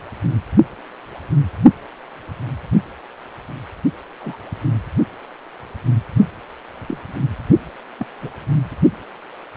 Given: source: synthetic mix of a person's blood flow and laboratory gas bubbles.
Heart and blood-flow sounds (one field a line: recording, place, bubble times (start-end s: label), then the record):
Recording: Doppler ultrasound of blood flow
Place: precordium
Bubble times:
4.20-4.37 s: bubbles
6.88-6.97 s: bubbles
7.98-8.05 s: bubbles
8.21-8.31 s: bubbles
From the record:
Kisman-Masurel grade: 121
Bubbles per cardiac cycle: 1 to 2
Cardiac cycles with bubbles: 10 to 50%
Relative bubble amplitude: barely perceptible (0.100 to 0.250)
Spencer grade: 2 (many but less than half of the cardiac periods contain bubble signals, singularly or in groups)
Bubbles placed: only in the low amplitude regions of the cardiac cycle